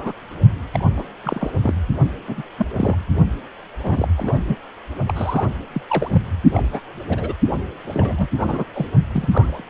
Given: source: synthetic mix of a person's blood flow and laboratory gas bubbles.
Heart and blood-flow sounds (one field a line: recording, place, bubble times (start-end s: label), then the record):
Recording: Doppler ultrasound of blood flow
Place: precordium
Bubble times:
0.00-0.13 s: bubbles
0.73-0.85 s: bubbles
0.96-1.04 s: bubbles
1.23-1.50 s: bubbles
1.62-1.75 s: bubbles
2.27-2.43 s: bubbles
2.58-2.67 s: bubbles
2.77-2.96 s: bubbles
3.83-4.08 s: bubbles
4.17-4.38 s: bubbles
4.47-4.57 s: bubbles
5.06-5.47 s: bubbles
5.73-5.81 s: bubbles
5.88-6.22 s: bubbles
6.54-6.63 s: bubbles
6.72-6.80 s: bubbles
7.08-7.33 s: bubbles
7.92-8.28 s: bubbles
8.38-8.65 s: bubbles
8.73-8.86 s: bubbles
9.12-9.64 s: bubbles
From the record:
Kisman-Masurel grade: 242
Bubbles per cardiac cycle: several, 3 to 8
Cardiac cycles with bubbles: 100%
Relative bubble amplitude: moderate (0.250 to 0.450)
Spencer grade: 3 (all of the cardiac periods contain showers or single bubble signals, but not dominating or overriding the cardiac motion signals)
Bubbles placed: only in the low amplitude regions of the cardiac cycle